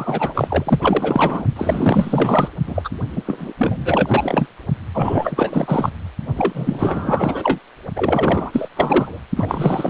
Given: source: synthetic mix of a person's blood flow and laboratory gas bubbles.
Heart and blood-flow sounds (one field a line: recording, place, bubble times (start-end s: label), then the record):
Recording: Doppler ultrasound of blood flow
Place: precordium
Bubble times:
0.00-1.45 s: bubbles
1.55-2.49 s: bubbles
2.66-2.89 s: bubbles
3.16-3.23 s: bubbles
3.27-3.53 s: bubbles
3.58-4.47 s: bubbles
4.93-5.90 s: bubbles
6.35-7.58 s: bubbles
7.96-8.68 s: bubbles
8.77-9.19 s: bubbles
9.36-9.90 s: bubbles
From the record:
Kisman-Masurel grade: 444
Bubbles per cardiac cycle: continuous sound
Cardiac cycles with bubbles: 100%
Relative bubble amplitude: maximal (0.775 to 0.999)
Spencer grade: 4 (maximum detectable bubble signal sounding continuously throughout systole and diastole of every cardiac period, and overriding the amplitude of the normal cardiac signals)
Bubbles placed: only in the low amplitude regions of the cardiac cycle